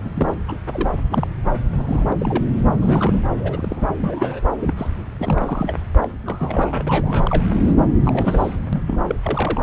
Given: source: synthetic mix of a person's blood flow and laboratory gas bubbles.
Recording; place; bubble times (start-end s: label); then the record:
Doppler ultrasound of blood flow; subclavian vein
0.04-0.10 s: bubbles
0.14-0.34 s: bubbles
0.47-0.61 s: bubbles
0.72-0.90 s: bubbles
1.10-1.27 s: bubbles
1.77-2.17 s: bubbles
2.20-2.44 s: bubbles
2.80-3.24 s: bubbles
3.39-3.87 s: bubbles
3.98-4.41 s: bubbles
4.60-4.75 s: bubbles
4.77-4.87 s: bubbles
5.17-5.75 s: bubbles
6.02-6.10 s: bubbles
6.25-6.84 s: bubbles
6.87-7.44 s: bubbles
7.67-7.74 s: bubbles
8.04-8.56 s: bubbles
8.72-8.82 s: bubbles
8.87-9.05 s: bubbles
9.09-9.15 s: bubbles
9.23-9.61 s: bubbles
From the record:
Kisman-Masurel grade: 242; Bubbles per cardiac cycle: several, 3 to 8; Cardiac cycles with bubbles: 100%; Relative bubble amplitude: moderate (0.250 to 0.450); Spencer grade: 3 (all of the cardiac periods contain showers or single bubble signals, but not dominating or overriding the cardiac motion signals); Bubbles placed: anywhere in the cardiac cycle